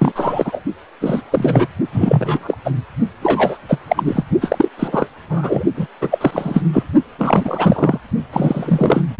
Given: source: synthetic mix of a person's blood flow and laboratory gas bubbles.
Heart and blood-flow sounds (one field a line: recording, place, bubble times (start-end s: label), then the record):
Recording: Doppler ultrasound of blood flow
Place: precordium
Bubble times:
0.00-0.12 s: bubbles
0.15-0.61 s: bubbles
1.01-1.22 s: bubbles
1.32-1.67 s: bubbles
1.92-2.56 s: bubbles
2.65-2.72 s: bubbles
3.21-3.58 s: bubbles
3.69-3.79 s: bubbles
3.88-4.24 s: bubbles
4.41-4.69 s: bubbles
4.77-5.08 s: bubbles
5.29-5.63 s: bubbles
5.76-5.87 s: bubbles
6.01-6.63 s: bubbles
6.72-6.83 s: bubbles
7.18-7.98 s: bubbles
8.32-9.02 s: bubbles
From the record:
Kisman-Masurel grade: 333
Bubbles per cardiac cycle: rolling drumbeat, 9 or more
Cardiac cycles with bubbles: 50 to 99%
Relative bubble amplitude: loud (0.450 to 0.775)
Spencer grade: 3 (all of the cardiac periods contain showers or single bubble signals, but not dominating or overriding the cardiac motion signals)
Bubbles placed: only in the low amplitude regions of the cardiac cycle